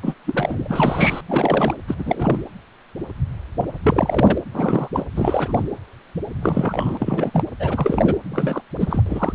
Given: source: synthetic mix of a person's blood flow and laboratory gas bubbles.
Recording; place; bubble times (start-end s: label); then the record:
Doppler ultrasound of blood flow; precordium
0.02-0.14 s: bubbles
0.24-1.21 s: bubbles
1.28-1.74 s: bubbles
1.88-2.40 s: bubbles
3.83-4.38 s: bubbles
4.54-4.88 s: bubbles
4.93-5.04 s: bubbles
5.16-5.62 s: bubbles
6.42-7.43 s: bubbles
7.59-8.15 s: bubbles
8.32-8.61 s: bubbles
8.79-9.02 s: bubbles
9.06-9.33 s: bubbles
From the record:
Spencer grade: 3 (all of the cardiac periods contain showers or single bubble signals, but not dominating or overriding the cardiac motion signals); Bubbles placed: anywhere in the cardiac cycle